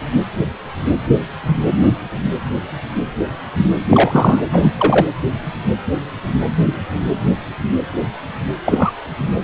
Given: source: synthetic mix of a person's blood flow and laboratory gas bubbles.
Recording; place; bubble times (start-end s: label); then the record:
Doppler ultrasound of blood flow; precordium
3.89-4.45 s: bubbles
4.51-4.72 s: bubbles
4.79-5.09 s: bubbles
8.65-8.93 s: bubbles
From the record:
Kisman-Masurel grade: 223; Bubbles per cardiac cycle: several, 3 to 8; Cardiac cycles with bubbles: 10 to 50%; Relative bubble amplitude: loud (0.450 to 0.775); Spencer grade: 2 (many but less than half of the cardiac periods contain bubble signals, singularly or in groups); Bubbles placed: anywhere in the cardiac cycle